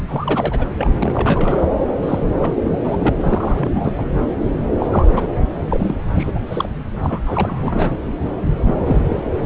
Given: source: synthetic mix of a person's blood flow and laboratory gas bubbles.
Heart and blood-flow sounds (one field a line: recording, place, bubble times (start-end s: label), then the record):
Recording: Doppler ultrasound of blood flow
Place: subclavian vein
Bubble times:
0.08-0.66 s: bubbles
0.77-1.67 s: bubbles
2.02-2.32 s: bubbles
2.38-2.73 s: bubbles
2.83-2.97 s: bubbles
3.00-3.14 s: bubbles
3.21-3.92 s: bubbles
3.98-4.04 s: bubbles
4.79-4.88 s: bubbles
4.91-5.21 s: bubbles
5.70-5.95 s: bubbles
6.12-6.39 s: bubbles
6.48-6.69 s: bubbles
7.02-7.20 s: bubbles
7.26-7.94 s: bubbles
8.51-8.73 s: bubbles
8.85-9.23 s: bubbles
From the record:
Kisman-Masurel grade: 342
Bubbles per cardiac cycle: rolling drumbeat, 9 or more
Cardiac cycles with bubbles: 100%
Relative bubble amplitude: moderate (0.250 to 0.450)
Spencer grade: 3 (all of the cardiac periods contain showers or single bubble signals, but not dominating or overriding the cardiac motion signals)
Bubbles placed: anywhere in the cardiac cycle